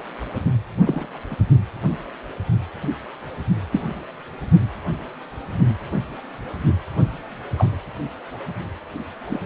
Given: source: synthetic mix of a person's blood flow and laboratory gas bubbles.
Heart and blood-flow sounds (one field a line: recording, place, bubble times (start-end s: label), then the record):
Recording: Doppler ultrasound of blood flow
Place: precordium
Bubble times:
0.84-1.05 s: bubbles
1.30-1.36 s: bubbles
3.72-3.87 s: bubbles
7.58-7.68 s: bubbles
9.30-9.39 s: bubbles
From the record:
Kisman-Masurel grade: 122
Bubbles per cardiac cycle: 1 to 2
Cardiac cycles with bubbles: 10 to 50%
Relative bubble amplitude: moderate (0.250 to 0.450)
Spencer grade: 2 (many but less than half of the cardiac periods contain bubble signals, singularly or in groups)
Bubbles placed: only in the low amplitude regions of the cardiac cycle